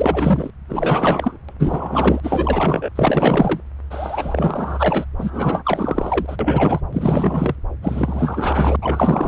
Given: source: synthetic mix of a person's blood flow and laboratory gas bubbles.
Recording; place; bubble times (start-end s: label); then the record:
Doppler ultrasound of blood flow; subclavian vein
0.00-0.50 s: bubbles
0.68-1.38 s: bubbles
1.48-1.52 s: bubbles
1.59-2.20 s: bubbles
2.23-2.90 s: bubbles
2.95-3.60 s: bubbles
3.90-5.05 s: bubbles
5.17-6.36 s: bubbles
6.39-6.80 s: bubbles
6.92-7.55 s: bubbles
7.82-8.76 s: bubbles
8.81-9.28 s: bubbles
From the record:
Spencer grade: 4 (maximum detectable bubble signal sounding continuously throughout systole and diastole of every cardiac period, and overriding the amplitude of the normal cardiac signals); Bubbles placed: anywhere in the cardiac cycle